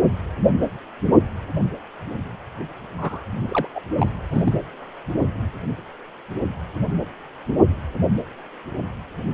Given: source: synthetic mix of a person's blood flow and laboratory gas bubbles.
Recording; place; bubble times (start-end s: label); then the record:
Doppler ultrasound of blood flow; precordium
2.96-3.25 s: bubbles
3.50-3.67 s: bubbles
3.75-3.81 s: bubbles
3.98-4.15 s: bubbles
4.28-4.58 s: bubbles
From the record:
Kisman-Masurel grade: 212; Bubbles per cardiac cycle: several, 3 to 8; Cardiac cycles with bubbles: 1 to 10%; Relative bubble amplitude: moderate (0.250 to 0.450); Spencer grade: 1 (occasional bubble signal discernible with the cardiac motion signal, with majority of cardiac periods free of bubbles); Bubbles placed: anywhere in the cardiac cycle